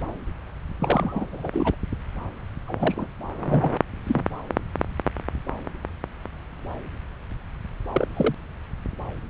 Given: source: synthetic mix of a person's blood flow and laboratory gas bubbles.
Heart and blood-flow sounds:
Doppler ultrasound of blood flow; subclavian vein
0.80-1.26 s: bubbles
1.32-1.75 s: bubbles
2.67-3.08 s: bubbles
3.46-3.70 s: bubbles
4.06-4.24 s: bubbles
7.92-8.07 s: bubbles
8.17-8.35 s: bubbles
From the record:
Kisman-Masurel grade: 221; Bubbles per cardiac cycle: several, 3 to 8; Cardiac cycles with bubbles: 10 to 50%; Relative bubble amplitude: barely perceptible (0.100 to 0.250); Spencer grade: 2 (many but less than half of the cardiac periods contain bubble signals, singularly or in groups); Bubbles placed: anywhere in the cardiac cycle

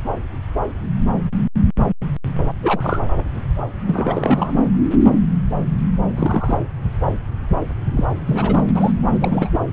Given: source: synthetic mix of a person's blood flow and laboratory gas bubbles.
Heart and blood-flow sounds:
Doppler ultrasound of blood flow; subclavian vein
2.62-3.00 s: bubbles
3.87-4.53 s: bubbles
6.15-6.58 s: bubbles
7.97-8.06 s: bubbles
8.26-8.63 s: bubbles
8.75-8.92 s: bubbles
9.20-9.60 s: bubbles
From the record:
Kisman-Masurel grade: 222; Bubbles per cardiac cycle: several, 3 to 8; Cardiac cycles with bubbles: 10 to 50%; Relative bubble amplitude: moderate (0.250 to 0.450); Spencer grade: 2 (many but less than half of the cardiac periods contain bubble signals, singularly or in groups); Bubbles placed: anywhere in the cardiac cycle

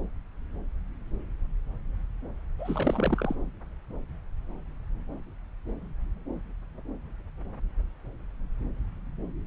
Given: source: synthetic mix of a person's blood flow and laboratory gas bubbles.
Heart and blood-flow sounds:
Doppler ultrasound of blood flow; subclavian vein
2.58-3.35 s: bubbles
From the record:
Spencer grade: 2 (many but less than half of the cardiac periods contain bubble signals, singularly or in groups); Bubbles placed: anywhere in the cardiac cycle

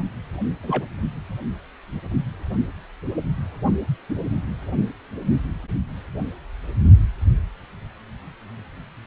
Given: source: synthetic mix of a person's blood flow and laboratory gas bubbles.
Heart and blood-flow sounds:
Doppler ultrasound of blood flow; precordium
0.63-0.85 s: bubbles
4.09-4.14 s: bubbles
From the record:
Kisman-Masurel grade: 122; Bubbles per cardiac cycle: 1 to 2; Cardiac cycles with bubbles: 10 to 50%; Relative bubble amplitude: moderate (0.250 to 0.450); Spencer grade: 2 (many but less than half of the cardiac periods contain bubble signals, singularly or in groups); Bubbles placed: only in the low amplitude regions of the cardiac cycle

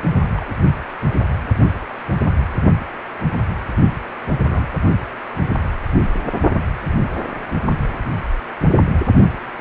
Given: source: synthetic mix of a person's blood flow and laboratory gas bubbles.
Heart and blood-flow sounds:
Doppler ultrasound of blood flow; precordium
0.34-0.54 s: bubbles
4.48-4.67 s: bubbles
From the record:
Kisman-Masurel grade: 121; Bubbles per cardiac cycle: 1 to 2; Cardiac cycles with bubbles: 10 to 50%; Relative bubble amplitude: barely perceptible (0.100 to 0.250); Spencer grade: 2 (many but less than half of the cardiac periods contain bubble signals, singularly or in groups); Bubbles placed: only in the low amplitude regions of the cardiac cycle

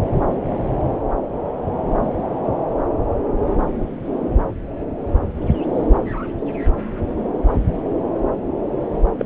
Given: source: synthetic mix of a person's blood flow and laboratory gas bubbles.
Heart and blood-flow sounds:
Doppler ultrasound of blood flow; subclavian vein
9.18-9.25 s: bubbles
From the record:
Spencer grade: 1 (occasional bubble signal discernible with the cardiac motion signal, with majority of cardiac periods free of bubbles); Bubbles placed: anywhere in the cardiac cycle

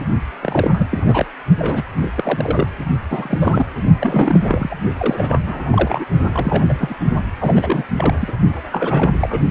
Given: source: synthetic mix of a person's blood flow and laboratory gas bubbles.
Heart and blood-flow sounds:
Doppler ultrasound of blood flow; precordium
0.41-0.87 s: bubbles
0.91-1.32 s: bubbles
1.59-1.83 s: bubbles
1.96-2.68 s: bubbles
3.09-3.66 s: bubbles
4.00-4.41 s: bubbles
4.43-4.75 s: bubbles
4.97-5.39 s: bubbles
5.46-6.04 s: bubbles
6.32-6.65 s: bubbles
6.68-6.96 s: bubbles
7.40-7.84 s: bubbles
7.96-8.32 s: bubbles
8.71-9.12 s: bubbles
9.20-9.40 s: bubbles
From the record:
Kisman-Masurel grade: 342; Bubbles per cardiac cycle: rolling drumbeat, 9 or more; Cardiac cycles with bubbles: 100%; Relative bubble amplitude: moderate (0.250 to 0.450); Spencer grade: 3 (all of the cardiac periods contain showers or single bubble signals, but not dominating or overriding the cardiac motion signals); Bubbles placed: only in the low amplitude regions of the cardiac cycle

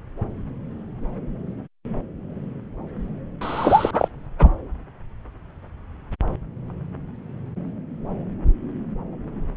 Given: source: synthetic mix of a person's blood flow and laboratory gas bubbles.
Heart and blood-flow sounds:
Doppler ultrasound of blood flow; subclavian vein
3.41-4.08 s: bubbles
4.38-4.50 s: bubbles
From the record:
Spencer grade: 1 (occasional bubble signal discernible with the cardiac motion signal, with majority of cardiac periods free of bubbles); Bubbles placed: anywhere in the cardiac cycle

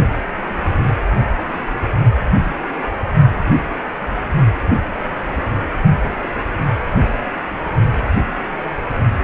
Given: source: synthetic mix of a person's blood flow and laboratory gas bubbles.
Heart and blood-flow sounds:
Doppler ultrasound of blood flow; precordium
no bubbles
From the record:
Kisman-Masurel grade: 000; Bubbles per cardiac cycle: 0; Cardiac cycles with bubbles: 0%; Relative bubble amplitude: no bubbles discernible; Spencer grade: 0 (complete lack of bubble signals)

